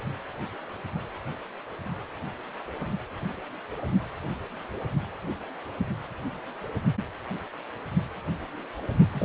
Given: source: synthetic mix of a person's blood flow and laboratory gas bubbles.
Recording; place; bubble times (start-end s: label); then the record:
Doppler ultrasound of blood flow; precordium
9.13-9.25 s: bubbles
From the record:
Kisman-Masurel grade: 211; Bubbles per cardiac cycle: several, 3 to 8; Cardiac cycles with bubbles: 1 to 10%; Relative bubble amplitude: barely perceptible (0.100 to 0.250); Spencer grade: 1 (occasional bubble signal discernible with the cardiac motion signal, with majority of cardiac periods free of bubbles); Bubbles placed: anywhere in the cardiac cycle